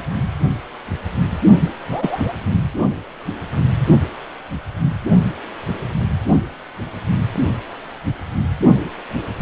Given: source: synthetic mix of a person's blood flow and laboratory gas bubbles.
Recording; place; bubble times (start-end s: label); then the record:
Doppler ultrasound of blood flow; precordium
1.89-2.34 s: bubbles
From the record:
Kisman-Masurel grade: 112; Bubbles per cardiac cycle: 1 to 2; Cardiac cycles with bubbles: 1 to 10%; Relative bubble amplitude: moderate (0.250 to 0.450); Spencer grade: 1 (occasional bubble signal discernible with the cardiac motion signal, with majority of cardiac periods free of bubbles); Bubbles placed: only in the low amplitude regions of the cardiac cycle